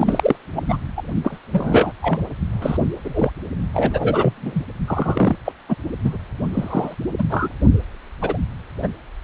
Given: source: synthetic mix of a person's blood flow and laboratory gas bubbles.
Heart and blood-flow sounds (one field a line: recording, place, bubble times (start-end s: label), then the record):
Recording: Doppler ultrasound of blood flow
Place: precordium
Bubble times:
0.00-0.36 s: bubbles
0.54-0.77 s: bubbles
0.96-1.02 s: bubbles
1.24-1.39 s: bubbles
1.52-1.92 s: bubbles
2.02-2.20 s: bubbles
2.62-2.77 s: bubbles
3.04-3.31 s: bubbles
3.73-4.62 s: bubbles
4.88-5.36 s: bubbles
5.45-5.52 s: bubbles
5.68-5.75 s: bubbles
6.03-6.17 s: bubbles
6.53-6.94 s: bubbles
7.18-7.23 s: bubbles
7.29-7.49 s: bubbles
8.21-8.38 s: bubbles
8.82-8.88 s: bubbles
From the record:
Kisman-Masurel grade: 243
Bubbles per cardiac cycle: several, 3 to 8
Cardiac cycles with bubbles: 100%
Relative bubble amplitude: loud (0.450 to 0.775)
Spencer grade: 3 (all of the cardiac periods contain showers or single bubble signals, but not dominating or overriding the cardiac motion signals)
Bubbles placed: only in the low amplitude regions of the cardiac cycle